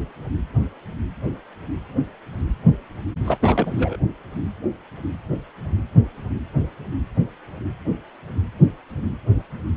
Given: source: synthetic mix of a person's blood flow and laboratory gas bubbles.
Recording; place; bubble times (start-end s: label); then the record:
Doppler ultrasound of blood flow; precordium
3.25-3.38 s: bubbles
3.40-3.97 s: bubbles
From the record:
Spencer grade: 1 (occasional bubble signal discernible with the cardiac motion signal, with majority of cardiac periods free of bubbles); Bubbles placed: anywhere in the cardiac cycle